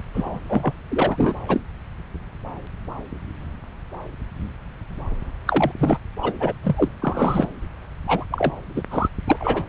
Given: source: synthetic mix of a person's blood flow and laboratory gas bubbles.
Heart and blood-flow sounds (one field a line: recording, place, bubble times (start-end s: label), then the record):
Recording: Doppler ultrasound of blood flow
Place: subclavian vein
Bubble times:
0.14-0.40 s: bubbles
0.48-0.72 s: bubbles
0.90-1.34 s: bubbles
1.47-1.60 s: bubbles
5.47-5.72 s: bubbles
5.79-5.98 s: bubbles
6.23-6.33 s: bubbles
6.40-6.53 s: bubbles
6.62-6.89 s: bubbles
7.02-7.47 s: bubbles
8.07-8.26 s: bubbles
8.31-8.52 s: bubbles
8.76-8.82 s: bubbles
8.91-9.08 s: bubbles
9.28-9.63 s: bubbles
From the record:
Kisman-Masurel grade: 332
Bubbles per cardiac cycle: rolling drumbeat, 9 or more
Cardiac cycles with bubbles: 50 to 99%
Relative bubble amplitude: moderate (0.250 to 0.450)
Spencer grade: 3 (all of the cardiac periods contain showers or single bubble signals, but not dominating or overriding the cardiac motion signals)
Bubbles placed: anywhere in the cardiac cycle